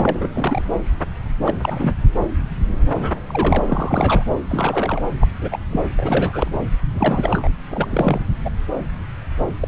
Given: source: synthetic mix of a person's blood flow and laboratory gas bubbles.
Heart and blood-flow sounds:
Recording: Doppler ultrasound of blood flow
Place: subclavian vein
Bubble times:
0.00-0.28 s: bubbles
0.33-0.62 s: bubbles
1.44-1.54 s: bubbles
1.62-1.92 s: bubbles
2.94-3.20 s: bubbles
3.27-4.32 s: bubbles
4.49-5.02 s: bubbles
5.21-5.28 s: bubbles
5.41-5.58 s: bubbles
5.71-5.80 s: bubbles
5.97-6.59 s: bubbles
6.93-7.48 s: bubbles
7.71-7.86 s: bubbles
7.90-8.21 s: bubbles
8.45-8.49 s: bubbles
9.60-9.68 s: bubbles
From the record:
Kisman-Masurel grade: 232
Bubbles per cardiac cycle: several, 3 to 8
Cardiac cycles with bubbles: 50 to 99%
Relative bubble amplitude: moderate (0.250 to 0.450)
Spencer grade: 3 (all of the cardiac periods contain showers or single bubble signals, but not dominating or overriding the cardiac motion signals)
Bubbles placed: anywhere in the cardiac cycle

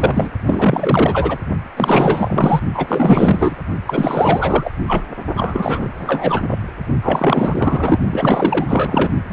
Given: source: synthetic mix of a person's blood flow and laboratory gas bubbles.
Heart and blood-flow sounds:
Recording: Doppler ultrasound of blood flow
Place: precordium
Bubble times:
0.00-0.30 s: bubbles
0.47-1.38 s: bubbles
1.76-2.61 s: bubbles
2.74-3.58 s: bubbles
3.86-4.70 s: bubbles
4.86-5.04 s: bubbles
5.34-5.88 s: bubbles
5.99-6.58 s: bubbles
7.02-7.98 s: bubbles
8.09-9.09 s: bubbles
9.28-9.33 s: bubbles
From the record:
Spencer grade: 4 (maximum detectable bubble signal sounding continuously throughout systole and diastole of every cardiac period, and overriding the amplitude of the normal cardiac signals)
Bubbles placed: only in the low amplitude regions of the cardiac cycle

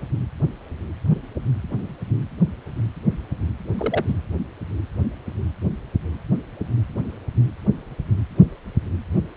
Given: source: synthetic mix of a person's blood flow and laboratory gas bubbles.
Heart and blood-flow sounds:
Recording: Doppler ultrasound of blood flow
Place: precordium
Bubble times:
3.78-4.05 s: bubbles
4.08-4.14 s: bubbles
From the record:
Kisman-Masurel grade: 112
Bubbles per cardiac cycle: 1 to 2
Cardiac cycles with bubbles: 1 to 10%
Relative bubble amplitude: moderate (0.250 to 0.450)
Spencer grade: 1 (occasional bubble signal discernible with the cardiac motion signal, with majority of cardiac periods free of bubbles)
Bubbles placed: anywhere in the cardiac cycle

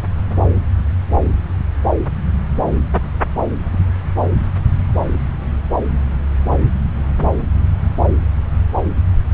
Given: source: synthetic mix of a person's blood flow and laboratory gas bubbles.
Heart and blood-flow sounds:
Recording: Doppler ultrasound of blood flow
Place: subclavian vein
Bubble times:
no bubbles
From the record:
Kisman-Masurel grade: 000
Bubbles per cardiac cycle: 0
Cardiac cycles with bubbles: 0%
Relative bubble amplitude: no bubbles discernible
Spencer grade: 0 (complete lack of bubble signals)

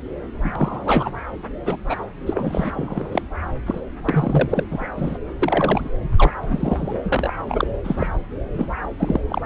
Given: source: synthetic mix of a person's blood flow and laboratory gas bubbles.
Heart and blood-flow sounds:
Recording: Doppler ultrasound of blood flow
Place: subclavian vein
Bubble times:
0.43-1.10 s: bubbles
1.65-1.76 s: bubbles
1.84-2.04 s: bubbles
2.26-2.70 s: bubbles
2.74-3.22 s: bubbles
3.66-3.80 s: bubbles
4.04-4.65 s: bubbles
4.71-4.87 s: bubbles
4.96-5.18 s: bubbles
5.42-5.89 s: bubbles
6.16-6.33 s: bubbles
6.43-6.94 s: bubbles
7.03-7.33 s: bubbles
7.46-7.68 s: bubbles
7.84-8.10 s: bubbles
8.54-8.67 s: bubbles
8.98-9.21 s: bubbles
9.29-9.46 s: bubbles
From the record:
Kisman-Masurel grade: 243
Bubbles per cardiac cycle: several, 3 to 8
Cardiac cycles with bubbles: 100%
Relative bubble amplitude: loud (0.450 to 0.775)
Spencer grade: 3 (all of the cardiac periods contain showers or single bubble signals, but not dominating or overriding the cardiac motion signals)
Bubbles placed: anywhere in the cardiac cycle

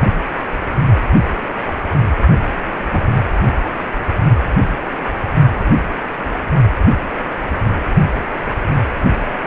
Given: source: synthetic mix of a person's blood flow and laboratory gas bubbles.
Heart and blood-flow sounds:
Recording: Doppler ultrasound of blood flow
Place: precordium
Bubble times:
0.00-0.09 s: bubbles
0.83-0.90 s: bubbles
2.90-3.17 s: bubbles
5.59-5.64 s: bubbles
9.44-9.47 s: bubbles
From the record:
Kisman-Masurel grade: 121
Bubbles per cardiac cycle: 1 to 2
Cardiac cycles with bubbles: 10 to 50%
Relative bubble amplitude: barely perceptible (0.100 to 0.250)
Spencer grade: 2 (many but less than half of the cardiac periods contain bubble signals, singularly or in groups)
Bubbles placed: only in the low amplitude regions of the cardiac cycle

